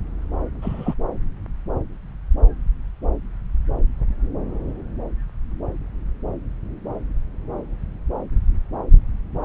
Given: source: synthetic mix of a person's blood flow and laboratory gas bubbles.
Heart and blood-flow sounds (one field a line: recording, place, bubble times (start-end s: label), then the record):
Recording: Doppler ultrasound of blood flow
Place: subclavian vein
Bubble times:
0.61-0.94 s: bubbles
From the record:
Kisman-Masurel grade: 113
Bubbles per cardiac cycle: 1 to 2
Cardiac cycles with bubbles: 1 to 10%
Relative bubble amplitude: loud (0.450 to 0.775)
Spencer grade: 1 (occasional bubble signal discernible with the cardiac motion signal, with majority of cardiac periods free of bubbles)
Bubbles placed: anywhere in the cardiac cycle